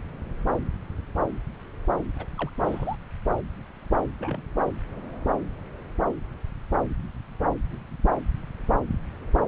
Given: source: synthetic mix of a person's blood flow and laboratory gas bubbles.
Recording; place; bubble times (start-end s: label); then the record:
Doppler ultrasound of blood flow; subclavian vein
2.16-2.25 s: bubbles
2.38-2.50 s: bubbles
2.64-2.96 s: bubbles
4.20-4.41 s: bubbles
From the record:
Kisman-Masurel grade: 211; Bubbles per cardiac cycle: several, 3 to 8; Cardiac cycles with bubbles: 1 to 10%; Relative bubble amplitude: barely perceptible (0.100 to 0.250); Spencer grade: 1 (occasional bubble signal discernible with the cardiac motion signal, with majority of cardiac periods free of bubbles); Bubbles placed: anywhere in the cardiac cycle